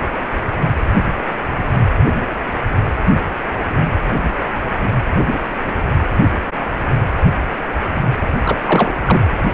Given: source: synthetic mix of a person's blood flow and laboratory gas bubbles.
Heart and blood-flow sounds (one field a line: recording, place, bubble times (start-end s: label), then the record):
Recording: Doppler ultrasound of blood flow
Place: precordium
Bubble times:
8.45-8.59 s: bubbles
8.65-8.94 s: bubbles
9.05-9.21 s: bubbles
From the record:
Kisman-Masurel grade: 212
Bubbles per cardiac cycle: several, 3 to 8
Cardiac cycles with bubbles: 1 to 10%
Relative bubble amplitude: moderate (0.250 to 0.450)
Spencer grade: 1 (occasional bubble signal discernible with the cardiac motion signal, with majority of cardiac periods free of bubbles)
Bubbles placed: anywhere in the cardiac cycle